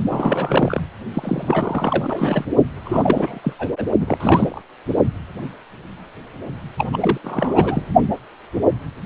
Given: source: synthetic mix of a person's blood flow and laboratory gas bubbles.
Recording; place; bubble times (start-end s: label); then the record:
Doppler ultrasound of blood flow; precordium
0.08-0.81 s: bubbles
1.14-2.45 s: bubbles
2.83-3.39 s: bubbles
3.43-3.52 s: bubbles
3.59-3.69 s: bubbles
3.78-3.84 s: bubbles
4.00-4.17 s: bubbles
4.20-4.62 s: bubbles
6.78-6.89 s: bubbles
6.92-6.97 s: bubbles
7.00-7.18 s: bubbles
7.24-7.83 s: bubbles
From the record:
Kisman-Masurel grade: 332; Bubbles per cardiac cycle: rolling drumbeat, 9 or more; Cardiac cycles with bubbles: 50 to 99%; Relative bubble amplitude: moderate (0.250 to 0.450); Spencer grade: 3 (all of the cardiac periods contain showers or single bubble signals, but not dominating or overriding the cardiac motion signals); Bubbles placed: only in the low amplitude regions of the cardiac cycle